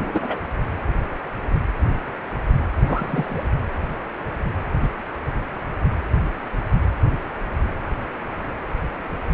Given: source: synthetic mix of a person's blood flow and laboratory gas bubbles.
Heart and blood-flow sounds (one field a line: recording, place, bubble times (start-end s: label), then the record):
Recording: Doppler ultrasound of blood flow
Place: precordium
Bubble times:
0.00-0.39 s: bubbles
2.86-3.46 s: bubbles
4.82-4.89 s: bubbles
From the record:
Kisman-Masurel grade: 122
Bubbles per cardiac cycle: 1 to 2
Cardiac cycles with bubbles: 10 to 50%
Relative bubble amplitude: moderate (0.250 to 0.450)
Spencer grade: 2 (many but less than half of the cardiac periods contain bubble signals, singularly or in groups)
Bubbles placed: anywhere in the cardiac cycle